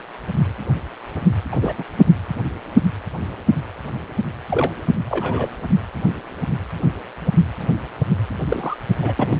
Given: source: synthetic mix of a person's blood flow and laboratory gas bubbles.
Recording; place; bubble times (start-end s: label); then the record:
Doppler ultrasound of blood flow; precordium
1.52-1.56 s: bubbles
1.62-1.73 s: bubbles
1.78-1.84 s: bubbles
4.50-4.72 s: bubbles
5.09-5.49 s: bubbles
5.70-5.75 s: bubbles
8.48-8.77 s: bubbles
9.02-9.13 s: bubbles
9.17-9.40 s: bubbles
From the record:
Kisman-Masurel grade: 222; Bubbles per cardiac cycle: several, 3 to 8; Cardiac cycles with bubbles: 10 to 50%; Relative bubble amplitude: moderate (0.250 to 0.450); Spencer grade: 2 (many but less than half of the cardiac periods contain bubble signals, singularly or in groups); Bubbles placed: anywhere in the cardiac cycle